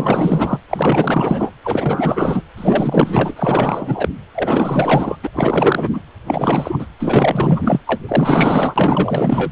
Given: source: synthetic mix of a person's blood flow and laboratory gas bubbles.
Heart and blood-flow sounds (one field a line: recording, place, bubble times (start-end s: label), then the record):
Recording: Doppler ultrasound of blood flow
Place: precordium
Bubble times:
0.00-0.59 s: bubbles
0.69-1.52 s: bubbles
1.64-2.44 s: bubbles
2.57-4.09 s: bubbles
4.34-5.17 s: bubbles
5.22-5.29 s: bubbles
5.34-5.89 s: bubbles
5.93-6.00 s: bubbles
6.26-6.86 s: bubbles
6.99-7.79 s: bubbles
7.87-8.01 s: bubbles
8.07-9.51 s: bubbles
From the record:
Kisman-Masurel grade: 444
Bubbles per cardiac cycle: continuous sound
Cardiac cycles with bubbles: 100%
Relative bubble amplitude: maximal (0.775 to 0.999)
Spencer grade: 4 (maximum detectable bubble signal sounding continuously throughout systole and diastole of every cardiac period, and overriding the amplitude of the normal cardiac signals)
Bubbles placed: anywhere in the cardiac cycle